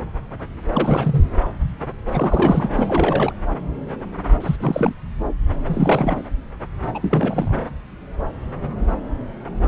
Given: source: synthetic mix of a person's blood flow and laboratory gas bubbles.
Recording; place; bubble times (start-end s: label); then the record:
Doppler ultrasound of blood flow; subclavian vein
0.73-1.30 s: bubbles
2.12-2.69 s: bubbles
2.75-3.33 s: bubbles
4.40-4.56 s: bubbles
4.59-4.93 s: bubbles
5.66-6.21 s: bubbles
6.95-7.56 s: bubbles
From the record:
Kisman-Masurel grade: 332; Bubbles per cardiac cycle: rolling drumbeat, 9 or more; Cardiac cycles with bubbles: 50 to 99%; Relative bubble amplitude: moderate (0.250 to 0.450); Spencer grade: 3 (all of the cardiac periods contain showers or single bubble signals, but not dominating or overriding the cardiac motion signals); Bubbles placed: anywhere in the cardiac cycle